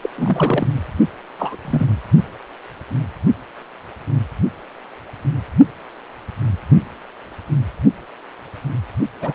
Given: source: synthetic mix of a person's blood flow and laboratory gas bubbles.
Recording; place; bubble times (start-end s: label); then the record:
Doppler ultrasound of blood flow; precordium
0.02-0.09 s: bubbles
0.17-0.67 s: bubbles
1.39-1.56 s: bubbles
1.65-1.87 s: bubbles
9.21-9.33 s: bubbles
From the record:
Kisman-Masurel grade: 222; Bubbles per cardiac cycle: several, 3 to 8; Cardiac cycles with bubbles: 10 to 50%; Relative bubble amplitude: moderate (0.250 to 0.450); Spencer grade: 2 (many but less than half of the cardiac periods contain bubble signals, singularly or in groups); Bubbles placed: only in the low amplitude regions of the cardiac cycle